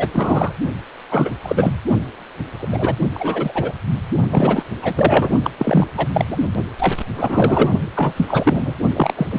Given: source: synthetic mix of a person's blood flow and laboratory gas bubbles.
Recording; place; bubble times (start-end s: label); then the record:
Doppler ultrasound of blood flow; precordium
0.00-0.07 s: bubbles
0.14-0.53 s: bubbles
1.11-1.31 s: bubbles
1.43-1.75 s: bubbles
2.59-2.67 s: bubbles
2.71-2.95 s: bubbles
3.14-3.72 s: bubbles
4.30-4.64 s: bubbles
4.82-5.31 s: bubbles
5.43-5.51 s: bubbles
5.58-5.87 s: bubbles
5.97-6.07 s: bubbles
6.13-6.37 s: bubbles
6.79-6.95 s: bubbles
7.15-7.71 s: bubbles
7.95-8.13 s: bubbles
8.16-8.74 s: bubbles
8.96-9.13 s: bubbles
9.16-9.27 s: bubbles
9.30-9.39 s: bubbles
From the record:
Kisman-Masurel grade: 343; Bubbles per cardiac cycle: rolling drumbeat, 9 or more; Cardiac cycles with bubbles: 100%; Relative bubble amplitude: loud (0.450 to 0.775); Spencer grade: 3 (all of the cardiac periods contain showers or single bubble signals, but not dominating or overriding the cardiac motion signals); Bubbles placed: only in the low amplitude regions of the cardiac cycle